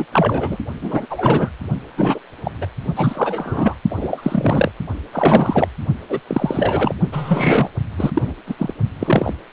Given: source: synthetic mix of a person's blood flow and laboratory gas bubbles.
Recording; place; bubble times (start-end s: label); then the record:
Doppler ultrasound of blood flow; precordium
0.00-0.05 s: bubbles
0.12-0.57 s: bubbles
0.81-1.06 s: bubbles
1.10-1.50 s: bubbles
1.97-2.19 s: bubbles
2.44-2.52 s: bubbles
2.61-2.67 s: bubbles
2.96-3.75 s: bubbles
3.90-4.71 s: bubbles
5.12-5.68 s: bubbles
6.09-6.20 s: bubbles
6.27-6.95 s: bubbles
7.12-7.69 s: bubbles
7.97-8.11 s: bubbles
8.14-8.34 s: bubbles
8.46-8.55 s: bubbles
8.58-8.73 s: bubbles
8.99-9.33 s: bubbles
From the record:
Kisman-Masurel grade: 343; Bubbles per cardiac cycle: rolling drumbeat, 9 or more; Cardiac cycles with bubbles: 100%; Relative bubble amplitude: loud (0.450 to 0.775); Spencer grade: 3 (all of the cardiac periods contain showers or single bubble signals, but not dominating or overriding the cardiac motion signals); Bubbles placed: only in the low amplitude regions of the cardiac cycle